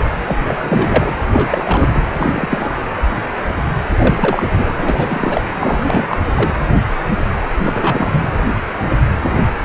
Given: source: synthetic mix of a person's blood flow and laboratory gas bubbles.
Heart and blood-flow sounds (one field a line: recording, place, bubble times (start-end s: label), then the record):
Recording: Doppler ultrasound of blood flow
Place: precordium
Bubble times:
0.24-1.13 s: bubbles
1.32-1.89 s: bubbles
1.95-2.04 s: bubbles
2.16-2.71 s: bubbles
3.98-4.48 s: bubbles
4.57-5.42 s: bubbles
5.59-6.05 s: bubbles
6.08-6.17 s: bubbles
6.35-6.51 s: bubbles
7.58-8.29 s: bubbles
From the record:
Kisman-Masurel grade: 332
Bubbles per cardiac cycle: rolling drumbeat, 9 or more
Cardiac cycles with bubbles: 50 to 99%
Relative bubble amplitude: moderate (0.250 to 0.450)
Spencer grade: 3 (all of the cardiac periods contain showers or single bubble signals, but not dominating or overriding the cardiac motion signals)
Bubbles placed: anywhere in the cardiac cycle